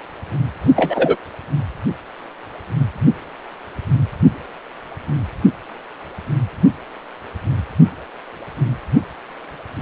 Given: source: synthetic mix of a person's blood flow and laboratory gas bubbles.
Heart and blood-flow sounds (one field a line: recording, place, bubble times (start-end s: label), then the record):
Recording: Doppler ultrasound of blood flow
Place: precordium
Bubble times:
0.76-1.16 s: bubbles
From the record:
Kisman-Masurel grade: 113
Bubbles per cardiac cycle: 1 to 2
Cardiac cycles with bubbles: 1 to 10%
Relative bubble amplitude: loud (0.450 to 0.775)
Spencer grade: 1 (occasional bubble signal discernible with the cardiac motion signal, with majority of cardiac periods free of bubbles)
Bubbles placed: only in the low amplitude regions of the cardiac cycle